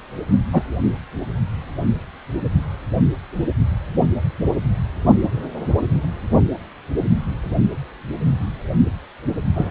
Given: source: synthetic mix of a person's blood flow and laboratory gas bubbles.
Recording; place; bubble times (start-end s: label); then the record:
Doppler ultrasound of blood flow; precordium
0.53-0.62 s: bubbles
9.55-9.70 s: bubbles
From the record:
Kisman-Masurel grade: 123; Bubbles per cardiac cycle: 1 to 2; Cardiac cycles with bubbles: 10 to 50%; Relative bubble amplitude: loud (0.450 to 0.775); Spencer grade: 2 (many but less than half of the cardiac periods contain bubble signals, singularly or in groups); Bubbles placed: only in the low amplitude regions of the cardiac cycle